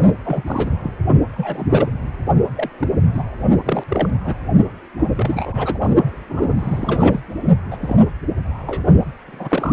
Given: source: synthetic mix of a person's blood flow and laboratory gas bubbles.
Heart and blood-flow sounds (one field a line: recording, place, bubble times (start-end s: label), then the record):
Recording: Doppler ultrasound of blood flow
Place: precordium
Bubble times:
0.24-0.42 s: bubbles
0.47-0.71 s: bubbles
0.83-0.91 s: bubbles
1.30-1.90 s: bubbles
2.56-2.69 s: bubbles
2.79-2.88 s: bubbles
3.14-3.24 s: bubbles
3.64-3.85 s: bubbles
3.88-4.10 s: bubbles
4.24-4.34 s: bubbles
4.98-5.10 s: bubbles
5.15-5.78 s: bubbles
6.29-6.55 s: bubbles
6.59-7.20 s: bubbles
7.71-7.77 s: bubbles
7.79-7.96 s: bubbles
8.67-8.84 s: bubbles
9.28-9.73 s: bubbles
From the record:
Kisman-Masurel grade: 242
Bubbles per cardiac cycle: several, 3 to 8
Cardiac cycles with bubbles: 100%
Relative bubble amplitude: moderate (0.250 to 0.450)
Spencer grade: 3 (all of the cardiac periods contain showers or single bubble signals, but not dominating or overriding the cardiac motion signals)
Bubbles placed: only in the low amplitude regions of the cardiac cycle